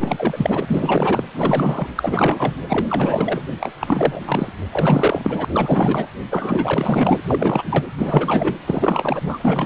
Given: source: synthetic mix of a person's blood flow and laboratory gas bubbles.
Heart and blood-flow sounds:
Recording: Doppler ultrasound of blood flow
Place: precordium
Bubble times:
0.00-1.24 s: bubbles
1.34-1.89 s: bubbles
1.95-2.56 s: bubbles
2.69-2.86 s: bubbles
2.89-3.43 s: bubbles
3.60-3.74 s: bubbles
3.80-4.21 s: bubbles
4.25-4.53 s: bubbles
4.71-5.45 s: bubbles
5.52-6.08 s: bubbles
6.30-7.18 s: bubbles
7.28-7.84 s: bubbles
7.98-8.54 s: bubbles
8.65-9.66 s: bubbles
From the record:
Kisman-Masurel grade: 444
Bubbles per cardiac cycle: continuous sound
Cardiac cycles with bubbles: 100%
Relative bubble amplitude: maximal (0.775 to 0.999)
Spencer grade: 4 (maximum detectable bubble signal sounding continuously throughout systole and diastole of every cardiac period, and overriding the amplitude of the normal cardiac signals)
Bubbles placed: anywhere in the cardiac cycle

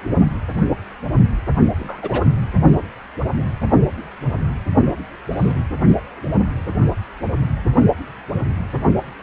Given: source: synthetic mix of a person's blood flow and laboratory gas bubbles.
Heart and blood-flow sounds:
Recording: Doppler ultrasound of blood flow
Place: precordium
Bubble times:
1.78-2.22 s: bubbles
5.32-5.53 s: bubbles
From the record:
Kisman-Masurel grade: 122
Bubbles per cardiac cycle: 1 to 2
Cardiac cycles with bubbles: 10 to 50%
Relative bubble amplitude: moderate (0.250 to 0.450)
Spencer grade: 2 (many but less than half of the cardiac periods contain bubble signals, singularly or in groups)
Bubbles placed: only in the low amplitude regions of the cardiac cycle

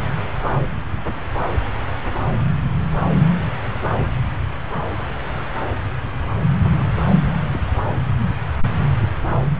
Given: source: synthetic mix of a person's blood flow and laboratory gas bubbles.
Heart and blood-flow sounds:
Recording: Doppler ultrasound of blood flow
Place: subclavian vein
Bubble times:
6.62-6.91 s: bubbles
7.53-7.58 s: bubbles
From the record:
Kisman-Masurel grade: 111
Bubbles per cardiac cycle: 1 to 2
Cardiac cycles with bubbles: 1 to 10%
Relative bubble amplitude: barely perceptible (0.100 to 0.250)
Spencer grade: 1 (occasional bubble signal discernible with the cardiac motion signal, with majority of cardiac periods free of bubbles)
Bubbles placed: anywhere in the cardiac cycle

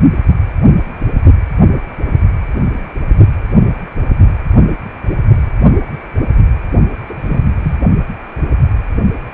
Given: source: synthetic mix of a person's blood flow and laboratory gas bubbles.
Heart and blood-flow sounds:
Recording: Doppler ultrasound of blood flow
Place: precordium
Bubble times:
7.06-7.42 s: bubbles
7.63-7.76 s: bubbles
From the record:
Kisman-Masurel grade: 122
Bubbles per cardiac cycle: 1 to 2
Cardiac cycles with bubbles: 10 to 50%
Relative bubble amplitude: moderate (0.250 to 0.450)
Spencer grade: 2 (many but less than half of the cardiac periods contain bubble signals, singularly or in groups)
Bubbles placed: only in the low amplitude regions of the cardiac cycle

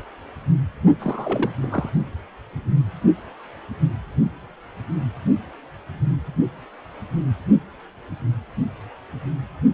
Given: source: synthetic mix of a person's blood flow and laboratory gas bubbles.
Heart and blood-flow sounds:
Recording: Doppler ultrasound of blood flow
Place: precordium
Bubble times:
0.99-1.51 s: bubbles
1.62-1.89 s: bubbles
From the record:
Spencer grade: 2 (many but less than half of the cardiac periods contain bubble signals, singularly or in groups)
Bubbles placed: only in the low amplitude regions of the cardiac cycle

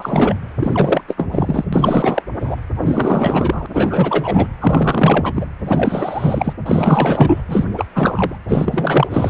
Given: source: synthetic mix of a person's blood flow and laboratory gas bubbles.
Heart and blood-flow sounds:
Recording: Doppler ultrasound of blood flow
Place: precordium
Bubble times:
0.00-0.36 s: bubbles
0.59-1.01 s: bubbles
1.08-1.64 s: bubbles
1.72-2.23 s: bubbles
2.40-2.56 s: bubbles
2.82-3.67 s: bubbles
3.73-4.47 s: bubbles
4.59-5.33 s: bubbles
5.35-5.46 s: bubbles
5.66-6.53 s: bubbles
6.66-7.42 s: bubbles
7.47-7.66 s: bubbles
7.77-7.86 s: bubbles
7.94-8.36 s: bubbles
8.48-9.30 s: bubbles
From the record:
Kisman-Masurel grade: 444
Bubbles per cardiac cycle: continuous sound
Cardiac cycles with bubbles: 100%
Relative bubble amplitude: maximal (0.775 to 0.999)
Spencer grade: 4 (maximum detectable bubble signal sounding continuously throughout systole and diastole of every cardiac period, and overriding the amplitude of the normal cardiac signals)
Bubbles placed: anywhere in the cardiac cycle

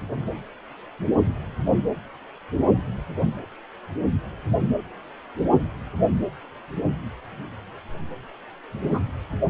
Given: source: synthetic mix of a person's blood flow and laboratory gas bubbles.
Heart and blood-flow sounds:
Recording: Doppler ultrasound of blood flow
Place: precordium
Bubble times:
8.83-8.99 s: bubbles
From the record:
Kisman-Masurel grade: 111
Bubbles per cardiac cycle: 1 to 2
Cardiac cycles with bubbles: 1 to 10%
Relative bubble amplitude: barely perceptible (0.100 to 0.250)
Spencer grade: 1 (occasional bubble signal discernible with the cardiac motion signal, with majority of cardiac periods free of bubbles)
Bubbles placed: anywhere in the cardiac cycle

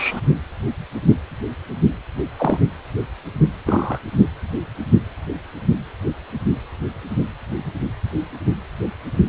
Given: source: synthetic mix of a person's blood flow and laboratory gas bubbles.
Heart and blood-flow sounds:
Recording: Doppler ultrasound of blood flow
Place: precordium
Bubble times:
0.00-0.21 s: bubbles
2.38-2.58 s: bubbles
3.65-3.99 s: bubbles
From the record:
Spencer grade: 2 (many but less than half of the cardiac periods contain bubble signals, singularly or in groups)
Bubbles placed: anywhere in the cardiac cycle

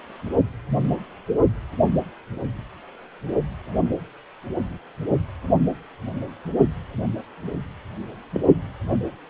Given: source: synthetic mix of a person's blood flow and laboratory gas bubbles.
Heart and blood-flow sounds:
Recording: Doppler ultrasound of blood flow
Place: precordium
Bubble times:
8.34-8.41 s: bubbles
From the record:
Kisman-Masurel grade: 112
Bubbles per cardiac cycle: 1 to 2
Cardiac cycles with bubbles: 1 to 10%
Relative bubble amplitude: moderate (0.250 to 0.450)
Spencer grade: 1 (occasional bubble signal discernible with the cardiac motion signal, with majority of cardiac periods free of bubbles)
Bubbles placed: anywhere in the cardiac cycle

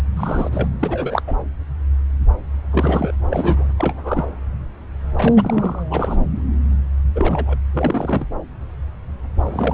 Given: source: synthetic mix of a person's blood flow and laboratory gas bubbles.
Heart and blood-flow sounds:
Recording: Doppler ultrasound of blood flow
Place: subclavian vein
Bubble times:
0.17-0.49 s: bubbles
0.52-0.68 s: bubbles
0.79-1.22 s: bubbles
1.27-1.35 s: bubbles
2.71-3.12 s: bubbles
3.30-3.65 s: bubbles
3.77-4.26 s: bubbles
5.16-5.83 s: bubbles
5.89-6.28 s: bubbles
7.15-7.57 s: bubbles
7.73-8.26 s: bubbles
9.44-9.74 s: bubbles
From the record:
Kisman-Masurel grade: 332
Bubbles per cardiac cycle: rolling drumbeat, 9 or more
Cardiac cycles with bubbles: 50 to 99%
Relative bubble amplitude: moderate (0.250 to 0.450)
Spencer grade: 3 (all of the cardiac periods contain showers or single bubble signals, but not dominating or overriding the cardiac motion signals)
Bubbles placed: anywhere in the cardiac cycle

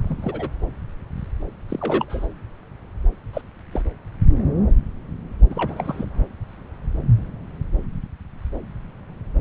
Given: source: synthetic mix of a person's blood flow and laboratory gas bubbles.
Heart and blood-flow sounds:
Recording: Doppler ultrasound of blood flow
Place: subclavian vein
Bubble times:
0.02-0.49 s: bubbles
1.69-2.27 s: bubbles
3.33-3.42 s: bubbles
3.71-3.82 s: bubbles
5.50-6.05 s: bubbles
From the record:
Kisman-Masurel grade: 221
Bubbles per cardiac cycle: several, 3 to 8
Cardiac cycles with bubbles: 10 to 50%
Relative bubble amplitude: barely perceptible (0.100 to 0.250)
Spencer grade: 2 (many but less than half of the cardiac periods contain bubble signals, singularly or in groups)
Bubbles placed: anywhere in the cardiac cycle

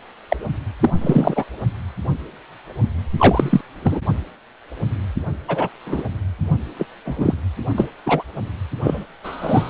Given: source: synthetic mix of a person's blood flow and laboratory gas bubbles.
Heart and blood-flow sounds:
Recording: Doppler ultrasound of blood flow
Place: precordium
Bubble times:
0.28-0.36 s: bubbles
0.79-0.90 s: bubbles
1.01-1.44 s: bubbles
3.18-3.61 s: bubbles
3.83-4.00 s: bubbles
5.48-5.69 s: bubbles
5.85-6.04 s: bubbles
6.79-6.85 s: bubbles
7.05-7.34 s: bubbles
7.76-7.88 s: bubbles
8.06-8.23 s: bubbles
8.82-9.04 s: bubbles
9.23-9.70 s: bubbles
From the record:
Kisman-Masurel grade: 233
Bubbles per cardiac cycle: several, 3 to 8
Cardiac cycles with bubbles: 50 to 99%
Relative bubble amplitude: loud (0.450 to 0.775)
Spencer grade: 3 (all of the cardiac periods contain showers or single bubble signals, but not dominating or overriding the cardiac motion signals)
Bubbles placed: only in the low amplitude regions of the cardiac cycle

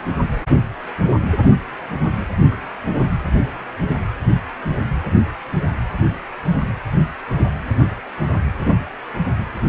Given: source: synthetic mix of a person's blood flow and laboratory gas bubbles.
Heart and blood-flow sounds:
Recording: Doppler ultrasound of blood flow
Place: precordium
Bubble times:
2.51-2.54 s: bubbles
From the record:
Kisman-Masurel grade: 112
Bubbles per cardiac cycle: 1 to 2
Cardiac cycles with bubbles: 1 to 10%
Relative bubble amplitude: moderate (0.250 to 0.450)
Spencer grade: 1 (occasional bubble signal discernible with the cardiac motion signal, with majority of cardiac periods free of bubbles)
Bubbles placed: anywhere in the cardiac cycle

